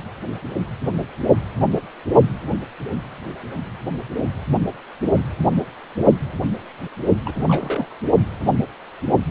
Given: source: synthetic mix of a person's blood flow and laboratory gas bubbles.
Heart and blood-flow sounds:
Doppler ultrasound of blood flow; precordium
7.25-7.89 s: bubbles
From the record:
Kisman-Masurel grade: 211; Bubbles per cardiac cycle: several, 3 to 8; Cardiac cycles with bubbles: 1 to 10%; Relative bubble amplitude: barely perceptible (0.100 to 0.250); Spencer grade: 1 (occasional bubble signal discernible with the cardiac motion signal, with majority of cardiac periods free of bubbles); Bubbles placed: only in the low amplitude regions of the cardiac cycle

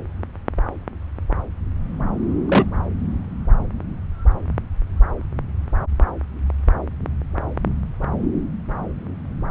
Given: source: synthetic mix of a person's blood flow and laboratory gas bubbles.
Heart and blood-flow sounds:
Doppler ultrasound of blood flow; subclavian vein
2.48-2.66 s: bubbles
From the record:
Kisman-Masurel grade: 113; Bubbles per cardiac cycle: 1 to 2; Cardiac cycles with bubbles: 1 to 10%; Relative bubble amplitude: loud (0.450 to 0.775); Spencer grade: 1 (occasional bubble signal discernible with the cardiac motion signal, with majority of cardiac periods free of bubbles); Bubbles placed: anywhere in the cardiac cycle

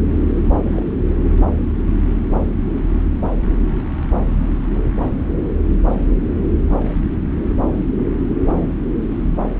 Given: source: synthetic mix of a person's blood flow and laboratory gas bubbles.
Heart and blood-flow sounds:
Doppler ultrasound of blood flow; subclavian vein
0.62-0.84 s: bubbles
From the record:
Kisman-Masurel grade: 112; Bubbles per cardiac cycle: 1 to 2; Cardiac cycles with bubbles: 1 to 10%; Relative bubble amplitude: moderate (0.250 to 0.450); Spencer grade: 1 (occasional bubble signal discernible with the cardiac motion signal, with majority of cardiac periods free of bubbles); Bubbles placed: anywhere in the cardiac cycle

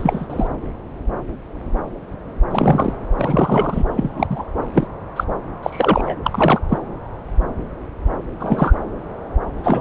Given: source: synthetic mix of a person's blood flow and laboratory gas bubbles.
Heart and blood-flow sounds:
Doppler ultrasound of blood flow; subclavian vein
0.00-0.27 s: bubbles
0.29-0.47 s: bubbles
2.50-2.93 s: bubbles
3.18-3.83 s: bubbles
3.90-4.27 s: bubbles
4.29-4.44 s: bubbles
4.74-4.87 s: bubbles
5.16-5.24 s: bubbles
5.62-6.15 s: bubbles
6.24-6.60 s: bubbles
6.69-6.78 s: bubbles
8.39-8.73 s: bubbles
9.63-9.81 s: bubbles
From the record:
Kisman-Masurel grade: 233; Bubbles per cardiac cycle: several, 3 to 8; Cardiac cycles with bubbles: 50 to 99%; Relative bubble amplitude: loud (0.450 to 0.775); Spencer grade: 3 (all of the cardiac periods contain showers or single bubble signals, but not dominating or overriding the cardiac motion signals); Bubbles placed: anywhere in the cardiac cycle

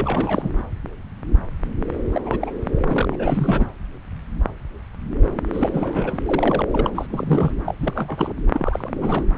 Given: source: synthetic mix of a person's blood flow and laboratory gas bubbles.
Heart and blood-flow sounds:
Doppler ultrasound of blood flow; subclavian vein
0.00-0.51 s: bubbles
2.08-2.21 s: bubbles
2.24-2.50 s: bubbles
2.71-3.67 s: bubbles
5.53-6.18 s: bubbles
6.25-6.62 s: bubbles
6.71-6.90 s: bubbles
6.95-7.06 s: bubbles
7.09-7.52 s: bubbles
7.64-7.75 s: bubbles
7.79-8.33 s: bubbles
8.53-9.24 s: bubbles
From the record:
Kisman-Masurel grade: 332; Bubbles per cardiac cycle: rolling drumbeat, 9 or more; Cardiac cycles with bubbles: 50 to 99%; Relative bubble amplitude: moderate (0.250 to 0.450); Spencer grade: 3 (all of the cardiac periods contain showers or single bubble signals, but not dominating or overriding the cardiac motion signals); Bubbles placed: anywhere in the cardiac cycle

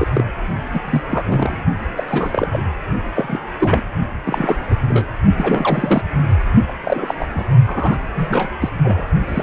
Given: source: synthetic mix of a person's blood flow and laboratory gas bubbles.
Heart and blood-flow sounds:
Doppler ultrasound of blood flow; precordium
0.00-0.08 s: bubbles
0.13-0.24 s: bubbles
0.73-0.80 s: bubbles
0.84-1.02 s: bubbles
1.09-1.57 s: bubbles
1.96-2.05 s: bubbles
2.07-2.67 s: bubbles
3.14-3.38 s: bubbles
3.59-3.82 s: bubbles
4.24-4.58 s: bubbles
4.70-4.75 s: bubbles
4.89-5.05 s: bubbles
5.37-6.04 s: bubbles
6.68-6.71 s: bubbles
6.83-7.14 s: bubbles
7.19-7.27 s: bubbles
7.35-7.44 s: bubbles
7.67-7.98 s: bubbles
8.15-8.49 s: bubbles
8.61-8.69 s: bubbles
8.83-9.06 s: bubbles
9.27-9.43 s: bubbles
From the record:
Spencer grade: 3 (all of the cardiac periods contain showers or single bubble signals, but not dominating or overriding the cardiac motion signals); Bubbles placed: only in the low amplitude regions of the cardiac cycle

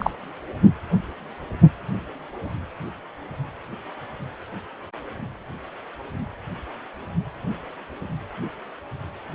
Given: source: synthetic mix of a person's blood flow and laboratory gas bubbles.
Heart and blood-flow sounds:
Doppler ultrasound of blood flow; precordium
0.00-0.11 s: bubbles
From the record:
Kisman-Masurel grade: 113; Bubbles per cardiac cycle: 1 to 2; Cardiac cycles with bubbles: 1 to 10%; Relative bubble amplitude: loud (0.450 to 0.775); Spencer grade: 1 (occasional bubble signal discernible with the cardiac motion signal, with majority of cardiac periods free of bubbles); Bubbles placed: anywhere in the cardiac cycle

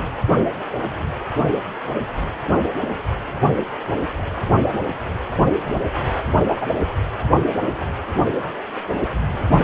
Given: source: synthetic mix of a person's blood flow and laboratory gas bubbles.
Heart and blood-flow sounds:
Doppler ultrasound of blood flow; precordium
6.60-6.67 s: bubbles
From the record:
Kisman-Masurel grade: 113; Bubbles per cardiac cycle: 1 to 2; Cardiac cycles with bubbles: 1 to 10%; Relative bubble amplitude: loud (0.450 to 0.775); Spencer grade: 1 (occasional bubble signal discernible with the cardiac motion signal, with majority of cardiac periods free of bubbles); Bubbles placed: anywhere in the cardiac cycle

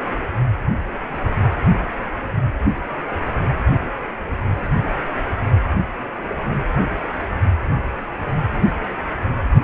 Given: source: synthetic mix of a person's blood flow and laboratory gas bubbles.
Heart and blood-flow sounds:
Doppler ultrasound of blood flow; precordium
no bubbles
From the record:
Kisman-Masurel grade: 000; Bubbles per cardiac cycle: 0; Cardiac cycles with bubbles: 0%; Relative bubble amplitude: no bubbles discernible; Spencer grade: 0 (complete lack of bubble signals)

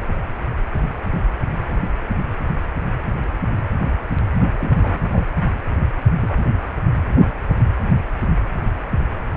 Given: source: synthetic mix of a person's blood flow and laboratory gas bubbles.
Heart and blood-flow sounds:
Doppler ultrasound of blood flow; precordium
4.58-5.08 s: bubbles
5.12-5.25 s: bubbles
6.21-6.34 s: bubbles
From the record:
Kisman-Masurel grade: 121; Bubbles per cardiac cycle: 1 to 2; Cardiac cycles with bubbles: 10 to 50%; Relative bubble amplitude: barely perceptible (0.100 to 0.250); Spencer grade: 2 (many but less than half of the cardiac periods contain bubble signals, singularly or in groups); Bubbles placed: anywhere in the cardiac cycle

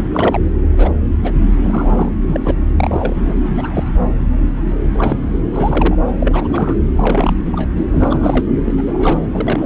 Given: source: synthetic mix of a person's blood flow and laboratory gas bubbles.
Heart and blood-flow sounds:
Doppler ultrasound of blood flow; subclavian vein
0.00-0.03 s: bubbles
0.11-0.39 s: bubbles
0.72-0.93 s: bubbles
1.23-1.31 s: bubbles
1.64-2.09 s: bubbles
2.21-2.40 s: bubbles
2.43-2.54 s: bubbles
2.75-3.16 s: bubbles
3.24-3.34 s: bubbles
3.42-3.83 s: bubbles
4.94-5.18 s: bubbles
5.53-5.96 s: bubbles
6.20-6.75 s: bubbles
6.96-7.69 s: bubbles
7.76-7.85 s: bubbles
7.92-8.45 s: bubbles
8.66-8.75 s: bubbles
8.77-9.19 s: bubbles
9.33-9.66 s: bubbles
From the record:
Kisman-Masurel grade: 232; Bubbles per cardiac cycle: several, 3 to 8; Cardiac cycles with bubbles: 50 to 99%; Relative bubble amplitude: moderate (0.250 to 0.450); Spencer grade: 3 (all of the cardiac periods contain showers or single bubble signals, but not dominating or overriding the cardiac motion signals); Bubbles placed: anywhere in the cardiac cycle

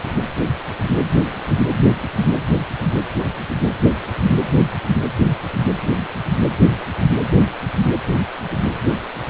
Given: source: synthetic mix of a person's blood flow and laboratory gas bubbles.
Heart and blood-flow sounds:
Doppler ultrasound of blood flow; precordium
no bubbles
From the record:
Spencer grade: 0 (complete lack of bubble signals)

